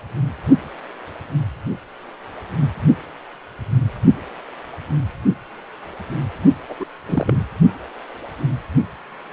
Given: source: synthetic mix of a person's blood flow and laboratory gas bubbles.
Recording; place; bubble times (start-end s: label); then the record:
Doppler ultrasound of blood flow; precordium
6.69-6.75 s: bubbles
6.79-6.86 s: bubbles
7.05-7.45 s: bubbles
From the record:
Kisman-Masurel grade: 212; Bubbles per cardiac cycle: several, 3 to 8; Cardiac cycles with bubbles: 1 to 10%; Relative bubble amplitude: moderate (0.250 to 0.450); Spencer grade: 1 (occasional bubble signal discernible with the cardiac motion signal, with majority of cardiac periods free of bubbles); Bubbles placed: only in the low amplitude regions of the cardiac cycle